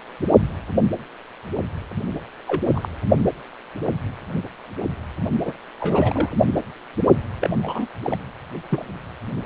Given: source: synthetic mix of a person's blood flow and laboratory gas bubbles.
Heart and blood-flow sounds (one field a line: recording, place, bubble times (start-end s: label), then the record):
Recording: Doppler ultrasound of blood flow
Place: precordium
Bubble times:
2.48-2.62 s: bubbles
2.75-2.89 s: bubbles
5.44-5.52 s: bubbles
5.80-6.29 s: bubbles
7.40-7.50 s: bubbles
7.60-7.88 s: bubbles
8.04-8.17 s: bubbles
8.69-8.86 s: bubbles
From the record:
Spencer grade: 2 (many but less than half of the cardiac periods contain bubble signals, singularly or in groups)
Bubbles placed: anywhere in the cardiac cycle